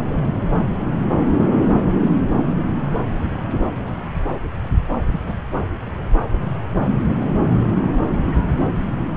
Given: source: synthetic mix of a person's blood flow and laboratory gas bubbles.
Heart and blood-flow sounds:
Doppler ultrasound of blood flow; subclavian vein
5.12-5.20 s: bubbles
5.26-5.34 s: bubbles
From the record:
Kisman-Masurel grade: 111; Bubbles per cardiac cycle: 1 to 2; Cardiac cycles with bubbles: 1 to 10%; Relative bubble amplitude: barely perceptible (0.100 to 0.250); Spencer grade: 1 (occasional bubble signal discernible with the cardiac motion signal, with majority of cardiac periods free of bubbles); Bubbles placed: anywhere in the cardiac cycle

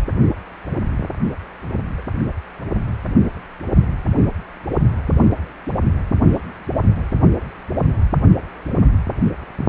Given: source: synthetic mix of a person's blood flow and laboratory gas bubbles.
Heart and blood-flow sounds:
Doppler ultrasound of blood flow; precordium
1.97-2.02 s: bubbles
From the record:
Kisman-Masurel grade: 111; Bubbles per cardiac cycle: 1 to 2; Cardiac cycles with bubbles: 1 to 10%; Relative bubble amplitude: barely perceptible (0.100 to 0.250); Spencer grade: 1 (occasional bubble signal discernible with the cardiac motion signal, with majority of cardiac periods free of bubbles); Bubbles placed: anywhere in the cardiac cycle

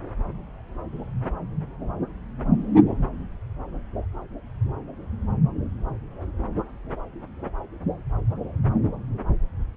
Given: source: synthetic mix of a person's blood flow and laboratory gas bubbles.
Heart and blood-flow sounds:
Doppler ultrasound of blood flow; subclavian vein
2.88-2.98 s: bubbles
From the record:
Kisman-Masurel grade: 121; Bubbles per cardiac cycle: 1 to 2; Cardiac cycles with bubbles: 10 to 50%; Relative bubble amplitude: barely perceptible (0.100 to 0.250); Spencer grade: 2 (many but less than half of the cardiac periods contain bubble signals, singularly or in groups); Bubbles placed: anywhere in the cardiac cycle

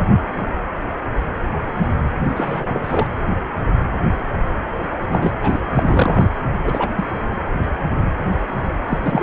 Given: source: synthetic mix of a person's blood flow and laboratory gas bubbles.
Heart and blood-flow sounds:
Doppler ultrasound of blood flow; precordium
2.27-3.08 s: bubbles
5.07-5.38 s: bubbles
5.42-5.59 s: bubbles
5.73-6.25 s: bubbles
6.64-6.90 s: bubbles
6.95-7.04 s: bubbles
8.89-8.98 s: bubbles
9.04-9.23 s: bubbles
From the record:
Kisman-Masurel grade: 232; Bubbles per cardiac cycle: several, 3 to 8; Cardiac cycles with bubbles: 50 to 99%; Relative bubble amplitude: moderate (0.250 to 0.450); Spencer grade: 3 (all of the cardiac periods contain showers or single bubble signals, but not dominating or overriding the cardiac motion signals); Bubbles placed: anywhere in the cardiac cycle

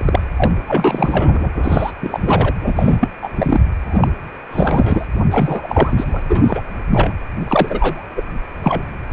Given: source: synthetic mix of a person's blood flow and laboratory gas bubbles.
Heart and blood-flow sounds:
Doppler ultrasound of blood flow; precordium
0.00-0.28 s: bubbles
0.37-0.51 s: bubbles
0.67-1.52 s: bubbles
1.55-1.92 s: bubbles
2.02-2.54 s: bubbles
2.61-2.98 s: bubbles
3.01-3.10 s: bubbles
3.22-3.30 s: bubbles
3.35-3.61 s: bubbles
3.86-4.07 s: bubbles
4.50-5.07 s: bubbles
5.30-6.23 s: bubbles
6.29-6.63 s: bubbles
6.89-7.13 s: bubbles
7.47-8.04 s: bubbles
8.16-8.23 s: bubbles
8.62-8.82 s: bubbles
From the record:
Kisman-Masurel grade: 343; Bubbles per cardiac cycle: rolling drumbeat, 9 or more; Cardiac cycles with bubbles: 100%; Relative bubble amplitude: loud (0.450 to 0.775); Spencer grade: 3 (all of the cardiac periods contain showers or single bubble signals, but not dominating or overriding the cardiac motion signals); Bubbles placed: anywhere in the cardiac cycle

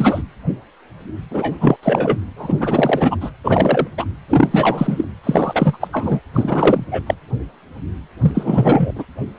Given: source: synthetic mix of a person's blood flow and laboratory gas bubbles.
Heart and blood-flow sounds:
Doppler ultrasound of blood flow; precordium
0.00-0.23 s: bubbles
1.30-1.57 s: bubbles
1.60-1.77 s: bubbles
1.83-2.18 s: bubbles
2.36-3.17 s: bubbles
3.21-3.31 s: bubbles
3.44-3.88 s: bubbles
3.98-4.05 s: bubbles
4.28-5.04 s: bubbles
5.23-5.77 s: bubbles
5.80-5.88 s: bubbles
5.92-6.20 s: bubbles
6.33-6.85 s: bubbles
6.91-7.02 s: bubbles
7.06-7.14 s: bubbles
8.21-8.91 s: bubbles
8.96-9.05 s: bubbles
From the record:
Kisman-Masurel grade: 333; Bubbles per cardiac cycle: rolling drumbeat, 9 or more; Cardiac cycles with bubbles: 50 to 99%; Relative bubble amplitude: loud (0.450 to 0.775); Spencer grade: 3 (all of the cardiac periods contain showers or single bubble signals, but not dominating or overriding the cardiac motion signals); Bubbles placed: anywhere in the cardiac cycle

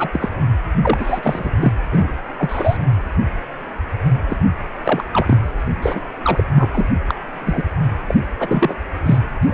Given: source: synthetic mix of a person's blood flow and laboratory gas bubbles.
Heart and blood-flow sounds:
Doppler ultrasound of blood flow; precordium
0.00-0.10 s: bubbles
0.13-0.30 s: bubbles
0.82-1.51 s: bubbles
1.60-1.72 s: bubbles
1.92-2.08 s: bubbles
2.38-2.77 s: bubbles
4.29-4.37 s: bubbles
4.85-5.04 s: bubbles
5.12-5.53 s: bubbles
5.82-6.02 s: bubbles
6.22-6.44 s: bubbles
6.55-6.69 s: bubbles
6.73-6.86 s: bubbles
7.08-7.15 s: bubbles
7.45-7.65 s: bubbles
8.06-8.14 s: bubbles
8.39-8.75 s: bubbles
9.05-9.19 s: bubbles
9.42-9.54 s: bubbles
From the record:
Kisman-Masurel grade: 233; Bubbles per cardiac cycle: several, 3 to 8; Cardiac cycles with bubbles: 50 to 99%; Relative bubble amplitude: loud (0.450 to 0.775); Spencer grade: 3 (all of the cardiac periods contain showers or single bubble signals, but not dominating or overriding the cardiac motion signals); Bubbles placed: anywhere in the cardiac cycle

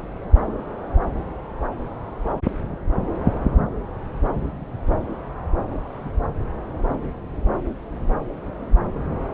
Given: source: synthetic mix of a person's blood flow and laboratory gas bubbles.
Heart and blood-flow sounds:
Doppler ultrasound of blood flow; subclavian vein
no bubbles
From the record:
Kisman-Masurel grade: 000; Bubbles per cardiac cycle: 0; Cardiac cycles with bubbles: 0%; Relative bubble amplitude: no bubbles discernible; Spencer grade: 0 (complete lack of bubble signals)

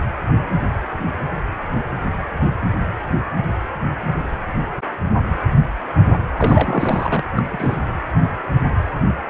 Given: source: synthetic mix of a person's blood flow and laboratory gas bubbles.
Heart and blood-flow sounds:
Doppler ultrasound of blood flow; precordium
6.37-7.23 s: bubbles
7.36-7.80 s: bubbles
From the record:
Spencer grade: 2 (many but less than half of the cardiac periods contain bubble signals, singularly or in groups); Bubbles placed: anywhere in the cardiac cycle

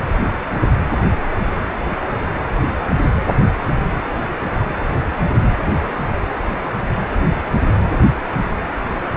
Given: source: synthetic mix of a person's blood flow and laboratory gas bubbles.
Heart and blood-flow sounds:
Doppler ultrasound of blood flow; precordium
no bubbles
From the record:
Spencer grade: 0 (complete lack of bubble signals)

